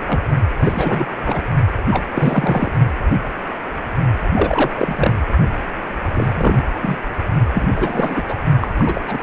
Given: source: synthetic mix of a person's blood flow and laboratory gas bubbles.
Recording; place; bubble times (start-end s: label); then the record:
Doppler ultrasound of blood flow; precordium
0.07-0.20 s: bubbles
0.60-1.07 s: bubbles
1.21-1.42 s: bubbles
1.91-2.05 s: bubbles
2.11-2.71 s: bubbles
4.34-4.71 s: bubbles
4.77-5.13 s: bubbles
6.13-6.63 s: bubbles
6.81-6.97 s: bubbles
7.52-7.69 s: bubbles
7.76-8.22 s: bubbles
8.28-8.37 s: bubbles
8.61-8.68 s: bubbles
8.78-9.00 s: bubbles
9.06-9.23 s: bubbles
From the record:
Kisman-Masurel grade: 233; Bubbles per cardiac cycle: several, 3 to 8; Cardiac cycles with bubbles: 50 to 99%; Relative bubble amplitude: loud (0.450 to 0.775); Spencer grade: 3 (all of the cardiac periods contain showers or single bubble signals, but not dominating or overriding the cardiac motion signals); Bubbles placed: only in the low amplitude regions of the cardiac cycle